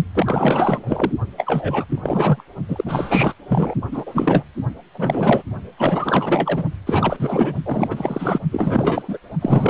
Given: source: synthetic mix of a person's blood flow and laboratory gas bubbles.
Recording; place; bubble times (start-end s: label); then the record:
Doppler ultrasound of blood flow; precordium
0.14-1.12 s: bubbles
1.37-1.85 s: bubbles
1.88-2.00 s: bubbles
2.02-2.43 s: bubbles
2.69-3.33 s: bubbles
3.48-3.75 s: bubbles
3.91-4.44 s: bubbles
4.94-5.43 s: bubbles
5.77-6.64 s: bubbles
6.86-7.54 s: bubbles
7.65-8.39 s: bubbles
8.51-9.17 s: bubbles
9.41-9.70 s: bubbles
From the record:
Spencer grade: 4 (maximum detectable bubble signal sounding continuously throughout systole and diastole of every cardiac period, and overriding the amplitude of the normal cardiac signals); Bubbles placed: only in the low amplitude regions of the cardiac cycle